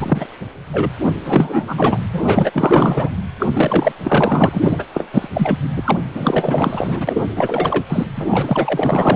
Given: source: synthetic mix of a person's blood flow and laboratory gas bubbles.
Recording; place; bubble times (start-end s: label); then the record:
Doppler ultrasound of blood flow; precordium
0.00-0.26 s: bubbles
0.73-0.91 s: bubbles
1.24-1.65 s: bubbles
1.67-2.00 s: bubbles
2.12-2.51 s: bubbles
2.54-3.09 s: bubbles
3.39-3.46 s: bubbles
3.53-3.92 s: bubbles
4.03-4.49 s: bubbles
4.51-4.86 s: bubbles
4.94-5.09 s: bubbles
5.12-5.29 s: bubbles
5.33-5.58 s: bubbles
5.76-5.97 s: bubbles
6.15-7.24 s: bubbles
7.35-7.85 s: bubbles
7.89-8.05 s: bubbles
8.16-8.26 s: bubbles
8.30-9.16 s: bubbles
From the record:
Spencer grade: 4 (maximum detectable bubble signal sounding continuously throughout systole and diastole of every cardiac period, and overriding the amplitude of the normal cardiac signals); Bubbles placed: anywhere in the cardiac cycle